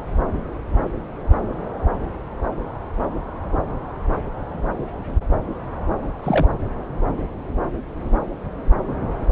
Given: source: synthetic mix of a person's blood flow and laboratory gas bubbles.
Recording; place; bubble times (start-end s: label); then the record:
Doppler ultrasound of blood flow; subclavian vein
6.23-6.47 s: bubbles
From the record:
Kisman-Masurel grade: 112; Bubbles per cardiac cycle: 1 to 2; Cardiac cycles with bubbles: 1 to 10%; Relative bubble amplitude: moderate (0.250 to 0.450); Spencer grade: 1 (occasional bubble signal discernible with the cardiac motion signal, with majority of cardiac periods free of bubbles); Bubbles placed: anywhere in the cardiac cycle